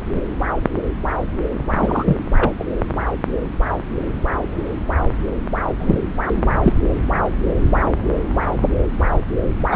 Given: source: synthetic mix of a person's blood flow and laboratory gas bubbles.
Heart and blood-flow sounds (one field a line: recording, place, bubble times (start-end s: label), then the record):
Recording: Doppler ultrasound of blood flow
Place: subclavian vein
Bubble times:
0.14-0.22 s: bubbles
1.70-2.16 s: bubbles
2.37-2.53 s: bubbles
2.59-2.64 s: bubbles
5.80-6.00 s: bubbles
6.62-6.74 s: bubbles
9.71-9.75 s: bubbles
From the record:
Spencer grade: 2 (many but less than half of the cardiac periods contain bubble signals, singularly or in groups)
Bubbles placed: anywhere in the cardiac cycle